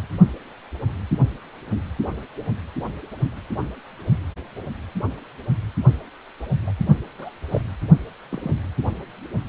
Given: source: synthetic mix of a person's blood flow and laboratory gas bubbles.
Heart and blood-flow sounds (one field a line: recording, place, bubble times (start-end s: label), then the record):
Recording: Doppler ultrasound of blood flow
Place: precordium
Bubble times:
6.67-6.71 s: bubbles
7.18-7.30 s: bubbles
7.50-7.61 s: bubbles
8.31-8.54 s: bubbles
From the record:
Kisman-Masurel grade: 121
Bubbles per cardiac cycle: 1 to 2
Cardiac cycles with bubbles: 10 to 50%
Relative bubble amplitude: barely perceptible (0.100 to 0.250)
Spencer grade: 2 (many but less than half of the cardiac periods contain bubble signals, singularly or in groups)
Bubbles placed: anywhere in the cardiac cycle